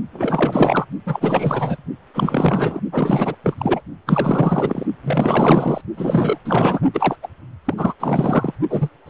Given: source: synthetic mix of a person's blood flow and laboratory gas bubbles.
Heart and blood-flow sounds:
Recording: Doppler ultrasound of blood flow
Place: precordium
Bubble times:
0.13-0.85 s: bubbles
1.06-1.77 s: bubbles
2.14-2.81 s: bubbles
2.92-3.35 s: bubbles
3.44-3.55 s: bubbles
3.58-3.81 s: bubbles
4.06-4.87 s: bubbles
5.03-5.82 s: bubbles
5.95-6.38 s: bubbles
6.45-6.80 s: bubbles
6.93-7.18 s: bubbles
7.22-7.28 s: bubbles
7.65-7.74 s: bubbles
7.77-7.94 s: bubbles
7.99-8.52 s: bubbles
8.70-8.89 s: bubbles
9.06-9.10 s: bubbles
From the record:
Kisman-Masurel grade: 444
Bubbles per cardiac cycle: continuous sound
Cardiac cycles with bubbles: 100%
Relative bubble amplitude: maximal (0.775 to 0.999)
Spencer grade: 4 (maximum detectable bubble signal sounding continuously throughout systole and diastole of every cardiac period, and overriding the amplitude of the normal cardiac signals)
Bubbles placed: only in the low amplitude regions of the cardiac cycle

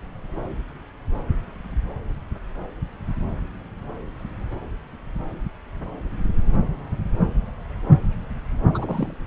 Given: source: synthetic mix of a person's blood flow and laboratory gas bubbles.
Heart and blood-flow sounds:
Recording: Doppler ultrasound of blood flow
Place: subclavian vein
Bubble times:
8.73-9.14 s: bubbles
From the record:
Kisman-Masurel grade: 212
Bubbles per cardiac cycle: several, 3 to 8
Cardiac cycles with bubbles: 1 to 10%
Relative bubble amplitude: moderate (0.250 to 0.450)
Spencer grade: 1 (occasional bubble signal discernible with the cardiac motion signal, with majority of cardiac periods free of bubbles)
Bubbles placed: anywhere in the cardiac cycle

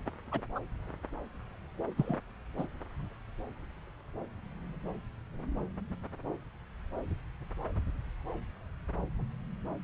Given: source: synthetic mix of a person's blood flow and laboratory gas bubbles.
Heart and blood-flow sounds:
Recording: Doppler ultrasound of blood flow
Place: subclavian vein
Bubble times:
0.32-0.41 s: bubbles
0.55-0.59 s: bubbles
1.97-2.19 s: bubbles
2.57-2.67 s: bubbles
From the record:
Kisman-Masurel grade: 121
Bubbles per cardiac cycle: 1 to 2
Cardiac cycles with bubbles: 10 to 50%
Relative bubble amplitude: barely perceptible (0.100 to 0.250)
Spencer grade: 2 (many but less than half of the cardiac periods contain bubble signals, singularly or in groups)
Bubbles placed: anywhere in the cardiac cycle

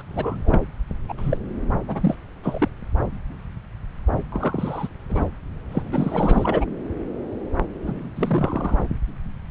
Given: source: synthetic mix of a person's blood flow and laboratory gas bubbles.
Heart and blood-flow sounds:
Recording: Doppler ultrasound of blood flow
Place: subclavian vein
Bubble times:
0.00-0.02 s: bubbles
0.08-0.57 s: bubbles
1.08-1.14 s: bubbles
1.18-1.37 s: bubbles
1.88-2.15 s: bubbles
2.43-2.68 s: bubbles
4.32-4.88 s: bubbles
5.09-5.25 s: bubbles
5.71-5.83 s: bubbles
5.92-6.65 s: bubbles
7.82-8.10 s: bubbles
8.16-8.79 s: bubbles
From the record:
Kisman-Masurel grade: 232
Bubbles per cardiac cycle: several, 3 to 8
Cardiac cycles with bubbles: 50 to 99%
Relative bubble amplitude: moderate (0.250 to 0.450)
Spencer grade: 3 (all of the cardiac periods contain showers or single bubble signals, but not dominating or overriding the cardiac motion signals)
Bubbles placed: anywhere in the cardiac cycle

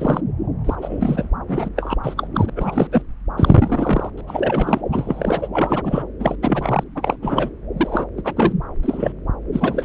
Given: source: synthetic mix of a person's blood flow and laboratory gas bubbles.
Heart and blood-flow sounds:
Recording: Doppler ultrasound of blood flow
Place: subclavian vein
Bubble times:
0.00-0.21 s: bubbles
0.65-1.29 s: bubbles
1.47-1.69 s: bubbles
1.76-1.97 s: bubbles
2.03-2.27 s: bubbles
2.34-2.50 s: bubbles
2.55-2.88 s: bubbles
2.92-3.02 s: bubbles
3.37-4.10 s: bubbles
4.17-4.21 s: bubbles
4.27-4.81 s: bubbles
4.92-5.49 s: bubbles
5.52-6.04 s: bubbles
6.19-6.35 s: bubbles
6.42-6.83 s: bubbles
6.95-7.17 s: bubbles
7.21-7.51 s: bubbles
7.76-8.06 s: bubbles
8.17-8.34 s: bubbles
8.36-8.53 s: bubbles
8.83-9.12 s: bubbles
9.52-9.85 s: bubbles
From the record:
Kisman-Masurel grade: 343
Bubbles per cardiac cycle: rolling drumbeat, 9 or more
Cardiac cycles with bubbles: 100%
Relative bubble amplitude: loud (0.450 to 0.775)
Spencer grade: 3 (all of the cardiac periods contain showers or single bubble signals, but not dominating or overriding the cardiac motion signals)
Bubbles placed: anywhere in the cardiac cycle

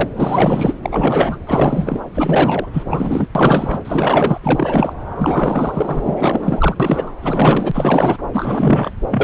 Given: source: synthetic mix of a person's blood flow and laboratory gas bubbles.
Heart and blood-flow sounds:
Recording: Doppler ultrasound of blood flow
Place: subclavian vein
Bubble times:
0.00-0.09 s: bubbles
0.16-0.74 s: bubbles
0.82-1.40 s: bubbles
1.47-2.00 s: bubbles
2.14-2.67 s: bubbles
2.73-3.28 s: bubbles
3.35-3.82 s: bubbles
3.85-4.41 s: bubbles
4.43-4.93 s: bubbles
5.18-6.01 s: bubbles
6.04-6.75 s: bubbles
6.79-7.12 s: bubbles
7.21-8.18 s: bubbles
8.32-8.91 s: bubbles
9.10-9.24 s: bubbles
From the record:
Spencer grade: 4 (maximum detectable bubble signal sounding continuously throughout systole and diastole of every cardiac period, and overriding the amplitude of the normal cardiac signals)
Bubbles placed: anywhere in the cardiac cycle

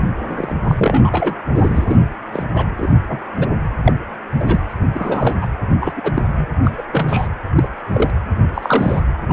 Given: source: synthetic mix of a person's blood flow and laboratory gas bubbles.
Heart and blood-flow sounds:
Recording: Doppler ultrasound of blood flow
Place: precordium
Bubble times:
0.00-0.02 s: bubbles
0.28-0.55 s: bubbles
0.64-1.35 s: bubbles
1.55-1.98 s: bubbles
2.33-2.46 s: bubbles
2.54-2.66 s: bubbles
2.77-2.93 s: bubbles
3.08-3.19 s: bubbles
3.37-3.47 s: bubbles
3.85-3.93 s: bubbles
4.36-4.77 s: bubbles
4.94-5.35 s: bubbles
5.41-5.46 s: bubbles
5.80-5.93 s: bubbles
5.96-6.24 s: bubbles
6.26-6.46 s: bubbles
6.62-6.74 s: bubbles
6.77-6.83 s: bubbles
6.92-7.28 s: bubbles
7.57-7.67 s: bubbles
7.93-8.11 s: bubbles
8.54-9.00 s: bubbles
9.28-9.33 s: bubbles
From the record:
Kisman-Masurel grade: 242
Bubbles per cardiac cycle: several, 3 to 8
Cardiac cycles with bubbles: 100%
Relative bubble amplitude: moderate (0.250 to 0.450)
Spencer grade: 3 (all of the cardiac periods contain showers or single bubble signals, but not dominating or overriding the cardiac motion signals)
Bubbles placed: anywhere in the cardiac cycle

